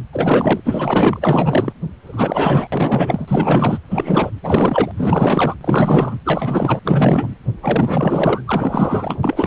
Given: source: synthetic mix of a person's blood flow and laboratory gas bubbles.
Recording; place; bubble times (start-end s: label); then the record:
Doppler ultrasound of blood flow; precordium
0.12-0.60 s: bubbles
0.65-1.72 s: bubbles
2.06-2.67 s: bubbles
2.72-3.25 s: bubbles
3.28-3.79 s: bubbles
3.90-4.31 s: bubbles
4.42-4.92 s: bubbles
4.97-5.55 s: bubbles
5.61-6.18 s: bubbles
6.25-6.79 s: bubbles
6.84-7.33 s: bubbles
7.62-9.20 s: bubbles
9.23-9.47 s: bubbles
From the record:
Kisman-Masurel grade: 444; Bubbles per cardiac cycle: continuous sound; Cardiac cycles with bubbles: 100%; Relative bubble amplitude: maximal (0.775 to 0.999); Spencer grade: 4 (maximum detectable bubble signal sounding continuously throughout systole and diastole of every cardiac period, and overriding the amplitude of the normal cardiac signals); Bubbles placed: anywhere in the cardiac cycle